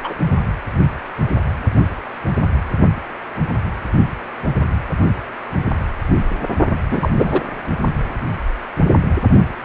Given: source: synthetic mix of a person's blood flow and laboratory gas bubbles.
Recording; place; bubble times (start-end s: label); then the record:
Doppler ultrasound of blood flow; precordium
0.04-0.13 s: bubbles
6.91-7.08 s: bubbles
7.14-7.42 s: bubbles
From the record:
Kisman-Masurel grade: 223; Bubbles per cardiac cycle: several, 3 to 8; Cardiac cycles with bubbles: 10 to 50%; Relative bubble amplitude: loud (0.450 to 0.775); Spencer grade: 2 (many but less than half of the cardiac periods contain bubble signals, singularly or in groups); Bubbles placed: only in the low amplitude regions of the cardiac cycle